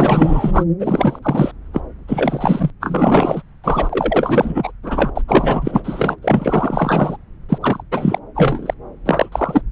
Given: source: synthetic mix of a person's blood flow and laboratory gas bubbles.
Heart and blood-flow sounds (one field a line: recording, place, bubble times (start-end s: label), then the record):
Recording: Doppler ultrasound of blood flow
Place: subclavian vein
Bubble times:
0.00-0.65 s: bubbles
0.79-1.19 s: bubbles
1.22-1.51 s: bubbles
1.73-1.81 s: bubbles
2.08-2.71 s: bubbles
2.80-3.42 s: bubbles
3.64-4.71 s: bubbles
4.83-5.11 s: bubbles
5.15-5.21 s: bubbles
5.27-6.18 s: bubbles
6.22-7.17 s: bubbles
7.48-7.58 s: bubbles
7.60-7.83 s: bubbles
7.92-8.19 s: bubbles
8.35-8.74 s: bubbles
9.06-9.29 s: bubbles
9.32-9.62 s: bubbles
From the record:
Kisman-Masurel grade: 444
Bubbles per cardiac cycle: continuous sound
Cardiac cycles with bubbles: 100%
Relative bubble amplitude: maximal (0.775 to 0.999)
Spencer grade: 4 (maximum detectable bubble signal sounding continuously throughout systole and diastole of every cardiac period, and overriding the amplitude of the normal cardiac signals)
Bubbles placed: anywhere in the cardiac cycle